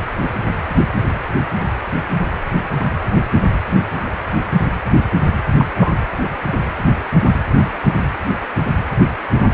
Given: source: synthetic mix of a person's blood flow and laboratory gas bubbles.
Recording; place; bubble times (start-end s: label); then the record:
Doppler ultrasound of blood flow; precordium
5.59-5.65 s: bubbles
5.74-5.93 s: bubbles
From the record:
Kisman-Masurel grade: 113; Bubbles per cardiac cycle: 1 to 2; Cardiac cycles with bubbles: 1 to 10%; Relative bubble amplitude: loud (0.450 to 0.775); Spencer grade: 1 (occasional bubble signal discernible with the cardiac motion signal, with majority of cardiac periods free of bubbles); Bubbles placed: anywhere in the cardiac cycle